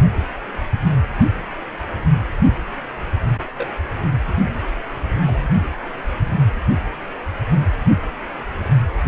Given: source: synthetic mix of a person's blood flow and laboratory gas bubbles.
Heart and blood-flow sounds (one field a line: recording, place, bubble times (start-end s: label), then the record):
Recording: Doppler ultrasound of blood flow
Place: precordium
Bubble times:
3.55-3.70 s: bubbles
5.26-5.49 s: bubbles
From the record:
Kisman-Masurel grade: 121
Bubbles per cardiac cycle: 1 to 2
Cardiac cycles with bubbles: 10 to 50%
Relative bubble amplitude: barely perceptible (0.100 to 0.250)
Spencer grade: 2 (many but less than half of the cardiac periods contain bubble signals, singularly or in groups)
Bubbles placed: anywhere in the cardiac cycle